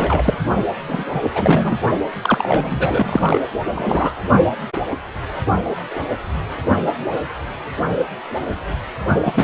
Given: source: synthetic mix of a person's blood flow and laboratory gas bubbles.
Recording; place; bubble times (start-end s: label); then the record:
Doppler ultrasound of blood flow; precordium
0.00-0.38 s: bubbles
0.88-1.04 s: bubbles
1.14-1.30 s: bubbles
1.34-1.78 s: bubbles
2.21-3.41 s: bubbles
3.65-3.71 s: bubbles
3.75-4.23 s: bubbles
9.24-9.44 s: bubbles
From the record:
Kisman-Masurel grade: 333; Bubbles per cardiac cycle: rolling drumbeat, 9 or more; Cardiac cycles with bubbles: 50 to 99%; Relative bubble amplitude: loud (0.450 to 0.775); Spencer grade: 3 (all of the cardiac periods contain showers or single bubble signals, but not dominating or overriding the cardiac motion signals); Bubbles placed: only in the low amplitude regions of the cardiac cycle